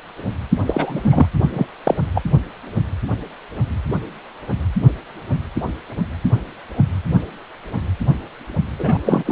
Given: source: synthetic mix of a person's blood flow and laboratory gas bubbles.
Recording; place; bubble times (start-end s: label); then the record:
Doppler ultrasound of blood flow; precordium
0.66-1.01 s: bubbles
1.04-1.26 s: bubbles
1.53-1.67 s: bubbles
1.84-1.95 s: bubbles
2.14-2.21 s: bubbles
8.79-8.98 s: bubbles
9.06-9.32 s: bubbles
From the record:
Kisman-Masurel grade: 223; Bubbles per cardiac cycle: several, 3 to 8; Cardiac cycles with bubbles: 10 to 50%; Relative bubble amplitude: loud (0.450 to 0.775); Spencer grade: 2 (many but less than half of the cardiac periods contain bubble signals, singularly or in groups); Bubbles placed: anywhere in the cardiac cycle